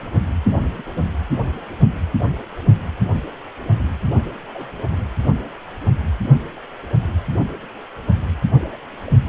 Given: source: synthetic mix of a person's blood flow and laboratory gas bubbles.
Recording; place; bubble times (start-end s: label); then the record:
Doppler ultrasound of blood flow; precordium
0.73-0.84 s: bubbles
4.53-4.73 s: bubbles
8.51-8.76 s: bubbles
9.07-9.12 s: bubbles
From the record:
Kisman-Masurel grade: 121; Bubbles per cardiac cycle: 1 to 2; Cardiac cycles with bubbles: 10 to 50%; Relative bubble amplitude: barely perceptible (0.100 to 0.250); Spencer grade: 2 (many but less than half of the cardiac periods contain bubble signals, singularly or in groups); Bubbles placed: anywhere in the cardiac cycle